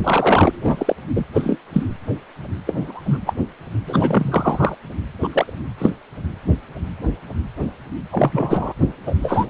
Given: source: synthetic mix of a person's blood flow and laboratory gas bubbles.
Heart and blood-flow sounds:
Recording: Doppler ultrasound of blood flow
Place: precordium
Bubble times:
0.03-0.95 s: bubbles
1.15-1.25 s: bubbles
1.34-1.58 s: bubbles
1.73-1.83 s: bubbles
2.65-3.02 s: bubbles
3.06-3.18 s: bubbles
3.25-3.33 s: bubbles
3.87-4.75 s: bubbles
5.21-5.52 s: bubbles
5.78-5.90 s: bubbles
8.10-8.74 s: bubbles
9.06-9.14 s: bubbles
9.22-9.46 s: bubbles
From the record:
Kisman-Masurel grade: 233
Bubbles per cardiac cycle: several, 3 to 8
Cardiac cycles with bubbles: 50 to 99%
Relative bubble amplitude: loud (0.450 to 0.775)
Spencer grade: 3 (all of the cardiac periods contain showers or single bubble signals, but not dominating or overriding the cardiac motion signals)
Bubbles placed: anywhere in the cardiac cycle

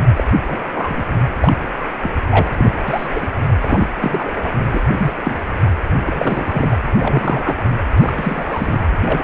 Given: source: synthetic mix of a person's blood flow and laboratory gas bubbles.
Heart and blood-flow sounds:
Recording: Doppler ultrasound of blood flow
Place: precordium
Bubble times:
0.15-0.23 s: bubbles
0.46-0.60 s: bubbles
0.72-1.03 s: bubbles
1.39-1.53 s: bubbles
1.79-1.84 s: bubbles
2.01-2.10 s: bubbles
2.30-2.53 s: bubbles
2.57-2.71 s: bubbles
2.86-3.08 s: bubbles
3.15-3.27 s: bubbles
3.61-3.87 s: bubbles
4.00-4.50 s: bubbles
4.73-4.80 s: bubbles
4.87-5.13 s: bubbles
5.25-5.38 s: bubbles
6.06-6.77 s: bubbles
6.98-7.70 s: bubbles
8.00-8.13 s: bubbles
8.18-8.79 s: bubbles
9.05-9.24 s: bubbles
From the record:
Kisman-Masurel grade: 242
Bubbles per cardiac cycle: several, 3 to 8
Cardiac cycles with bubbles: 100%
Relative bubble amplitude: moderate (0.250 to 0.450)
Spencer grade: 3 (all of the cardiac periods contain showers or single bubble signals, but not dominating or overriding the cardiac motion signals)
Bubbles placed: anywhere in the cardiac cycle

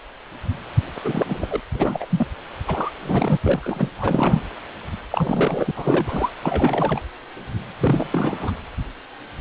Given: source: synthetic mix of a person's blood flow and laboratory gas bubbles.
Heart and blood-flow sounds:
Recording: Doppler ultrasound of blood flow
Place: precordium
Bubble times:
1.04-1.60 s: bubbles
1.73-2.05 s: bubbles
2.09-2.27 s: bubbles
2.67-2.91 s: bubbles
3.02-3.37 s: bubbles
3.42-3.88 s: bubbles
3.98-4.42 s: bubbles
5.10-5.72 s: bubbles
5.76-6.31 s: bubbles
6.42-7.02 s: bubbles
7.80-8.10 s: bubbles
8.12-8.52 s: bubbles
From the record:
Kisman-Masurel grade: 332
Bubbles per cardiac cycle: rolling drumbeat, 9 or more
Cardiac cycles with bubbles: 50 to 99%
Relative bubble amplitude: moderate (0.250 to 0.450)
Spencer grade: 3 (all of the cardiac periods contain showers or single bubble signals, but not dominating or overriding the cardiac motion signals)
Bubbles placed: anywhere in the cardiac cycle

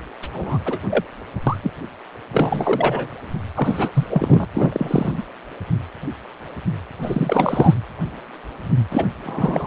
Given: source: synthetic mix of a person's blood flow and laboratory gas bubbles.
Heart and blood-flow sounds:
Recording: Doppler ultrasound of blood flow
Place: precordium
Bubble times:
0.22-0.28 s: bubbles
0.32-0.59 s: bubbles
0.65-0.78 s: bubbles
0.89-1.03 s: bubbles
1.47-1.57 s: bubbles
1.62-1.71 s: bubbles
2.33-3.08 s: bubbles
3.54-3.89 s: bubbles
3.94-4.07 s: bubbles
4.09-4.45 s: bubbles
4.54-5.12 s: bubbles
5.17-5.24 s: bubbles
7.01-7.74 s: bubbles
8.90-9.05 s: bubbles
9.23-9.67 s: bubbles
From the record:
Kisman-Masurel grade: 233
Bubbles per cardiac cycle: several, 3 to 8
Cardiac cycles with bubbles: 50 to 99%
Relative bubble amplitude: loud (0.450 to 0.775)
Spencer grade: 3 (all of the cardiac periods contain showers or single bubble signals, but not dominating or overriding the cardiac motion signals)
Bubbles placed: anywhere in the cardiac cycle

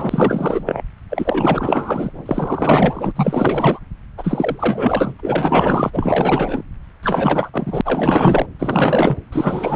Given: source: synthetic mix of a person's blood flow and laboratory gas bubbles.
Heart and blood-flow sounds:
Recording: Doppler ultrasound of blood flow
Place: subclavian vein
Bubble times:
0.00-0.82 s: bubbles
1.09-2.23 s: bubbles
2.25-3.11 s: bubbles
3.15-3.79 s: bubbles
4.18-5.14 s: bubbles
5.19-5.91 s: bubbles
5.93-6.62 s: bubbles
7.03-7.50 s: bubbles
7.53-7.81 s: bubbles
7.85-8.46 s: bubbles
8.59-9.17 s: bubbles
9.32-9.76 s: bubbles
From the record:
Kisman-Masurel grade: 444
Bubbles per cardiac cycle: continuous sound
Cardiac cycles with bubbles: 100%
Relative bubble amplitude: maximal (0.775 to 0.999)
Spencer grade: 4 (maximum detectable bubble signal sounding continuously throughout systole and diastole of every cardiac period, and overriding the amplitude of the normal cardiac signals)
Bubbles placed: anywhere in the cardiac cycle

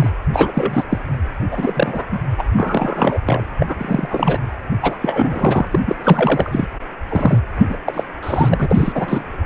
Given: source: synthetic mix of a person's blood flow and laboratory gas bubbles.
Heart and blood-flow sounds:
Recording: Doppler ultrasound of blood flow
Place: precordium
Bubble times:
0.00-0.09 s: bubbles
0.33-0.51 s: bubbles
0.54-0.83 s: bubbles
0.90-0.98 s: bubbles
1.51-2.05 s: bubbles
2.11-2.19 s: bubbles
2.38-2.43 s: bubbles
2.56-3.20 s: bubbles
3.26-3.42 s: bubbles
3.59-3.76 s: bubbles
3.78-4.08 s: bubbles
4.10-4.38 s: bubbles
4.82-4.96 s: bubbles
5.02-5.67 s: bubbles
5.71-5.80 s: bubbles
5.85-5.96 s: bubbles
6.03-6.67 s: bubbles
7.09-7.39 s: bubbles
7.59-7.76 s: bubbles
7.87-8.04 s: bubbles
8.23-8.68 s: bubbles
8.71-9.24 s: bubbles
From the record:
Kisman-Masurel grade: 343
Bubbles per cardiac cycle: rolling drumbeat, 9 or more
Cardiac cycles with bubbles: 100%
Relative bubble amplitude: loud (0.450 to 0.775)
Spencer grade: 3 (all of the cardiac periods contain showers or single bubble signals, but not dominating or overriding the cardiac motion signals)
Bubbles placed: anywhere in the cardiac cycle

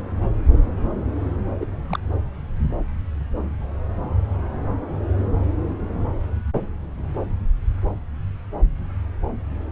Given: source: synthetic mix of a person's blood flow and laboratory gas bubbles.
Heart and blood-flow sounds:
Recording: Doppler ultrasound of blood flow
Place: subclavian vein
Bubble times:
1.60-1.65 s: bubbles
1.89-1.99 s: bubbles
From the record:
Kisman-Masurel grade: 212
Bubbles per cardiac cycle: several, 3 to 8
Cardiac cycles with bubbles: 1 to 10%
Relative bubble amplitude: moderate (0.250 to 0.450)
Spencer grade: 1 (occasional bubble signal discernible with the cardiac motion signal, with majority of cardiac periods free of bubbles)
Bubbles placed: anywhere in the cardiac cycle

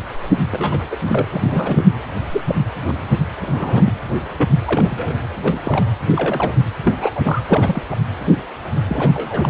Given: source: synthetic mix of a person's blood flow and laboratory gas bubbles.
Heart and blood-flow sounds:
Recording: Doppler ultrasound of blood flow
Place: precordium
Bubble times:
0.51-0.84 s: bubbles
0.90-0.96 s: bubbles
1.06-1.25 s: bubbles
1.31-1.85 s: bubbles
2.31-2.41 s: bubbles
2.48-2.55 s: bubbles
2.87-2.94 s: bubbles
3.41-3.93 s: bubbles
4.37-4.49 s: bubbles
4.65-5.15 s: bubbles
5.45-5.59 s: bubbles
5.63-5.85 s: bubbles
6.16-6.56 s: bubbles
6.85-7.10 s: bubbles
7.15-7.21 s: bubbles
7.24-7.42 s: bubbles
7.44-7.83 s: bubbles
7.90-7.96 s: bubbles
8.87-9.12 s: bubbles
9.14-9.50 s: bubbles
From the record:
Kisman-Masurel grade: 232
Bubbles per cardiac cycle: several, 3 to 8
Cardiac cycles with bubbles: 50 to 99%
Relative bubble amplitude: moderate (0.250 to 0.450)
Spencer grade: 3 (all of the cardiac periods contain showers or single bubble signals, but not dominating or overriding the cardiac motion signals)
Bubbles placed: anywhere in the cardiac cycle

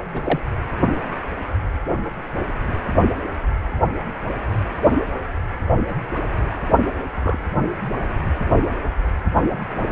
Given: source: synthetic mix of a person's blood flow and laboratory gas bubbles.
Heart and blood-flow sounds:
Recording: Doppler ultrasound of blood flow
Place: precordium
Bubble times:
0.14-0.40 s: bubbles
7.10-7.38 s: bubbles
From the record:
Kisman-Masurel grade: 122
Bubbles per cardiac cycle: 1 to 2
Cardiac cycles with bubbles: 10 to 50%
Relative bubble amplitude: moderate (0.250 to 0.450)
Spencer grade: 2 (many but less than half of the cardiac periods contain bubble signals, singularly or in groups)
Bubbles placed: only in the low amplitude regions of the cardiac cycle

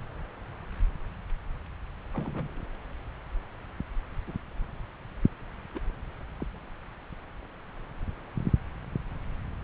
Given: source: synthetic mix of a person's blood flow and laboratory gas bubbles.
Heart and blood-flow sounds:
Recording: Doppler ultrasound of blood flow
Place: subclavian vein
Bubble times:
2.14-2.62 s: bubbles
4.27-4.36 s: bubbles
5.74-5.80 s: bubbles
6.36-6.46 s: bubbles
From the record:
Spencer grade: 2 (many but less than half of the cardiac periods contain bubble signals, singularly or in groups)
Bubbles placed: anywhere in the cardiac cycle

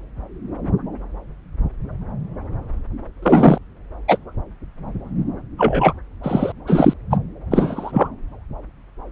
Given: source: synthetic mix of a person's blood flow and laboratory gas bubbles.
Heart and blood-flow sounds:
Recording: Doppler ultrasound of blood flow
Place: subclavian vein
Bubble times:
3.22-3.58 s: bubbles
4.07-4.18 s: bubbles
5.58-5.93 s: bubbles
6.23-6.52 s: bubbles
6.67-6.93 s: bubbles
7.10-7.17 s: bubbles
7.51-8.09 s: bubbles
From the record:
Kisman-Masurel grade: 223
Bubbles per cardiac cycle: several, 3 to 8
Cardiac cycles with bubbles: 10 to 50%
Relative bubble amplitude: loud (0.450 to 0.775)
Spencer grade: 2 (many but less than half of the cardiac periods contain bubble signals, singularly or in groups)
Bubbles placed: anywhere in the cardiac cycle

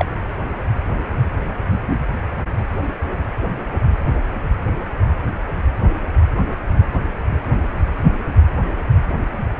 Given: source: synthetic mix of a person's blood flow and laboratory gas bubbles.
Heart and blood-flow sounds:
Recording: Doppler ultrasound of blood flow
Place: precordium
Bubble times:
0.00-0.05 s: bubbles
From the record:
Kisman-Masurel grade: 112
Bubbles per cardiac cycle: 1 to 2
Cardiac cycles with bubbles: 1 to 10%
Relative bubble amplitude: moderate (0.250 to 0.450)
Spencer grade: 1 (occasional bubble signal discernible with the cardiac motion signal, with majority of cardiac periods free of bubbles)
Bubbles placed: anywhere in the cardiac cycle

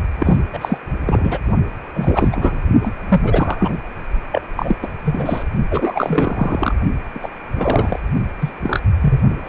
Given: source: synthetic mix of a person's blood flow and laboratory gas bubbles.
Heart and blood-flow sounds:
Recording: Doppler ultrasound of blood flow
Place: precordium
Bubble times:
0.19-0.37 s: bubbles
0.52-0.58 s: bubbles
0.61-0.78 s: bubbles
1.06-1.39 s: bubbles
1.94-2.29 s: bubbles
2.32-2.58 s: bubbles
2.83-2.92 s: bubbles
3.09-3.75 s: bubbles
4.31-4.42 s: bubbles
4.57-4.75 s: bubbles
4.82-4.88 s: bubbles
5.05-5.43 s: bubbles
5.71-6.75 s: bubbles
7.14-7.20 s: bubbles
7.22-7.29 s: bubbles
7.55-8.00 s: bubbles
8.41-8.52 s: bubbles
8.61-8.81 s: bubbles
9.01-9.27 s: bubbles
9.36-9.49 s: bubbles
From the record:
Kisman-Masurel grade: 343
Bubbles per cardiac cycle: rolling drumbeat, 9 or more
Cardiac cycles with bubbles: 100%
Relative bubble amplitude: loud (0.450 to 0.775)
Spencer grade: 3 (all of the cardiac periods contain showers or single bubble signals, but not dominating or overriding the cardiac motion signals)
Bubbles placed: only in the low amplitude regions of the cardiac cycle

